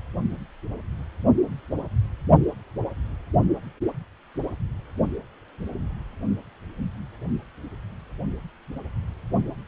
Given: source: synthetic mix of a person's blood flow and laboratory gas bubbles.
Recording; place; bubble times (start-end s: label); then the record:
Doppler ultrasound of blood flow; precordium
no bubbles
From the record:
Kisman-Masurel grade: 000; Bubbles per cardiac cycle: 0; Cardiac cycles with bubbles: 0%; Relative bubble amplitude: no bubbles discernible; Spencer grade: 0 (complete lack of bubble signals)